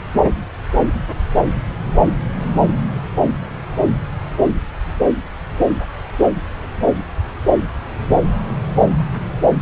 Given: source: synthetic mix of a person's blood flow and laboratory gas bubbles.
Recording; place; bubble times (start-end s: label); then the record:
Doppler ultrasound of blood flow; subclavian vein
no bubbles
From the record:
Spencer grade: 0 (complete lack of bubble signals)